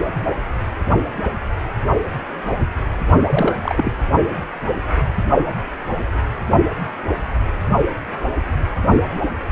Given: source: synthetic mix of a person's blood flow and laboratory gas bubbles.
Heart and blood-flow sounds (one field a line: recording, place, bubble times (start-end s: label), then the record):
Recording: Doppler ultrasound of blood flow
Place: precordium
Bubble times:
3.27-3.56 s: bubbles
3.62-3.92 s: bubbles
From the record:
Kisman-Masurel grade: 212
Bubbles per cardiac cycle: several, 3 to 8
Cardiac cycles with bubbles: 1 to 10%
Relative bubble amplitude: moderate (0.250 to 0.450)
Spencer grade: 1 (occasional bubble signal discernible with the cardiac motion signal, with majority of cardiac periods free of bubbles)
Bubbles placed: only in the low amplitude regions of the cardiac cycle